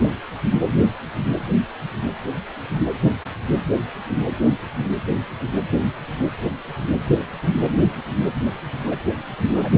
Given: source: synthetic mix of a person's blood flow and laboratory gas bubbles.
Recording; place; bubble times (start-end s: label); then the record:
Doppler ultrasound of blood flow; precordium
8.86-8.97 s: bubbles
9.51-9.72 s: bubbles
From the record:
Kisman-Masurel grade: 211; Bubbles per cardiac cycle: several, 3 to 8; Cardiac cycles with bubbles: 1 to 10%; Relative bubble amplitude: barely perceptible (0.100 to 0.250); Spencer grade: 1 (occasional bubble signal discernible with the cardiac motion signal, with majority of cardiac periods free of bubbles); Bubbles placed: anywhere in the cardiac cycle